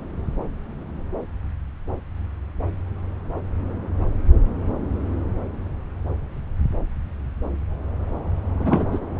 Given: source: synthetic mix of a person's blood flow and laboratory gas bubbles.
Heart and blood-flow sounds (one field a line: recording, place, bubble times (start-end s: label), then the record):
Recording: Doppler ultrasound of blood flow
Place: subclavian vein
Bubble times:
8.60-8.86 s: bubbles
8.91-8.99 s: bubbles
From the record:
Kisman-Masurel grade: 212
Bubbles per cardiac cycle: several, 3 to 8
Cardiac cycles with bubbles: 1 to 10%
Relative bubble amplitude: moderate (0.250 to 0.450)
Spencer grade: 1 (occasional bubble signal discernible with the cardiac motion signal, with majority of cardiac periods free of bubbles)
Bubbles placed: anywhere in the cardiac cycle